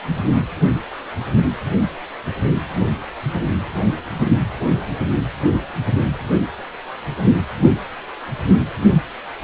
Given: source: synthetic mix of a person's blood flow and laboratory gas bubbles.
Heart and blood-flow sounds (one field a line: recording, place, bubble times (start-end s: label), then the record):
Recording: Doppler ultrasound of blood flow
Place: precordium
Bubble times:
0.35-0.42 s: bubbles
From the record:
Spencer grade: 2 (many but less than half of the cardiac periods contain bubble signals, singularly or in groups)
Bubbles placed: anywhere in the cardiac cycle